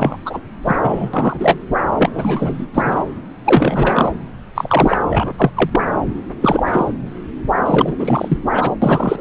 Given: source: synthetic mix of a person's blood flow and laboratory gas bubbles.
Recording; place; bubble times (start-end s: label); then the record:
Doppler ultrasound of blood flow; subclavian vein
0.00-0.18 s: bubbles
0.25-0.40 s: bubbles
0.64-0.76 s: bubbles
0.82-1.10 s: bubbles
1.13-1.58 s: bubbles
1.98-2.10 s: bubbles
2.15-2.67 s: bubbles
2.74-3.04 s: bubbles
3.45-4.12 s: bubbles
4.55-5.01 s: bubbles
5.09-5.33 s: bubbles
5.38-5.50 s: bubbles
5.55-5.80 s: bubbles
6.41-6.93 s: bubbles
7.65-8.38 s: bubbles
8.52-8.74 s: bubbles
8.81-9.21 s: bubbles
From the record:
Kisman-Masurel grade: 343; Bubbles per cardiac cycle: rolling drumbeat, 9 or more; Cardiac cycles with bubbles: 100%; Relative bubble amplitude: loud (0.450 to 0.775); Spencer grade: 3 (all of the cardiac periods contain showers or single bubble signals, but not dominating or overriding the cardiac motion signals); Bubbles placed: anywhere in the cardiac cycle